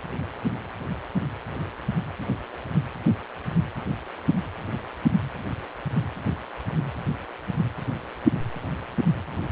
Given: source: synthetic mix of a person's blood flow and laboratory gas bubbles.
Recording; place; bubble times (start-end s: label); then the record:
Doppler ultrasound of blood flow; precordium
no bubbles
From the record:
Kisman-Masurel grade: 000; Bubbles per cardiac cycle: 0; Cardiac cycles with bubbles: 0%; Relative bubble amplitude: no bubbles discernible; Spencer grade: 0 (complete lack of bubble signals)